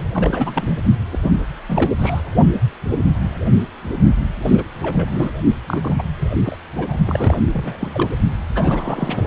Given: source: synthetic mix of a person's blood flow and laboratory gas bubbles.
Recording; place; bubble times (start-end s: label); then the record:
Doppler ultrasound of blood flow; precordium
0.00-0.11 s: bubbles
0.14-0.79 s: bubbles
1.12-1.18 s: bubbles
1.22-1.30 s: bubbles
1.69-1.92 s: bubbles
1.99-2.21 s: bubbles
4.42-4.64 s: bubbles
4.82-5.32 s: bubbles
5.67-6.03 s: bubbles
6.21-6.28 s: bubbles
6.45-6.55 s: bubbles
6.75-6.96 s: bubbles
7.06-7.38 s: bubbles
7.53-8.10 s: bubbles
8.55-9.24 s: bubbles
From the record:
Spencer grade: 3 (all of the cardiac periods contain showers or single bubble signals, but not dominating or overriding the cardiac motion signals); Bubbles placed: only in the low amplitude regions of the cardiac cycle